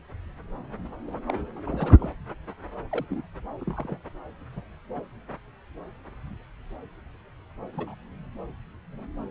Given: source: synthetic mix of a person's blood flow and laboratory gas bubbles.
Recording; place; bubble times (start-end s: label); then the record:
Doppler ultrasound of blood flow; subclavian vein
1.07-1.14 s: bubbles
1.27-1.34 s: bubbles
1.64-2.12 s: bubbles
2.91-3.05 s: bubbles
3.10-3.21 s: bubbles
3.60-3.97 s: bubbles
4.56-4.61 s: bubbles
4.96-5.00 s: bubbles
7.73-7.95 s: bubbles
From the record:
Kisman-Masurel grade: 121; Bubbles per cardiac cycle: 1 to 2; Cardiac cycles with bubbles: 10 to 50%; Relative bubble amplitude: barely perceptible (0.100 to 0.250); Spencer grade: 2 (many but less than half of the cardiac periods contain bubble signals, singularly or in groups); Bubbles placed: anywhere in the cardiac cycle